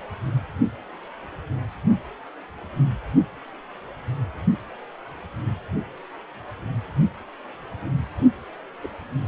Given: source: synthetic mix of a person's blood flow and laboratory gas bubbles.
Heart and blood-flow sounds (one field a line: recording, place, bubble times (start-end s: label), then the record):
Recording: Doppler ultrasound of blood flow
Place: precordium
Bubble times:
8.82-8.87 s: bubbles
From the record:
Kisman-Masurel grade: 121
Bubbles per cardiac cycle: 1 to 2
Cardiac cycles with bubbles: 10 to 50%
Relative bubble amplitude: barely perceptible (0.100 to 0.250)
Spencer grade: 2 (many but less than half of the cardiac periods contain bubble signals, singularly or in groups)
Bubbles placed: anywhere in the cardiac cycle